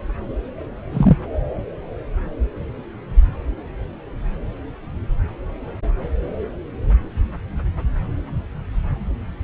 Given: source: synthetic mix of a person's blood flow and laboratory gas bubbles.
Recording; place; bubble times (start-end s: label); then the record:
Doppler ultrasound of blood flow; subclavian vein
0.93-1.18 s: bubbles
From the record:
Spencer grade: 1 (occasional bubble signal discernible with the cardiac motion signal, with majority of cardiac periods free of bubbles); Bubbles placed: anywhere in the cardiac cycle